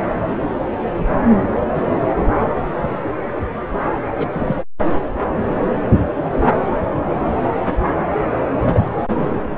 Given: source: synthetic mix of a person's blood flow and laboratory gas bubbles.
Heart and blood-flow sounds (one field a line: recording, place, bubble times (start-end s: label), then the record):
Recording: Doppler ultrasound of blood flow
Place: subclavian vein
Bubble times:
4.18-4.28 s: bubbles
4.32-4.56 s: bubbles
8.58-8.80 s: bubbles
From the record:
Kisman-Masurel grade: 122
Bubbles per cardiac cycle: 1 to 2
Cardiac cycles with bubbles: 10 to 50%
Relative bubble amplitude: moderate (0.250 to 0.450)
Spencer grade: 2 (many but less than half of the cardiac periods contain bubble signals, singularly or in groups)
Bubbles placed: anywhere in the cardiac cycle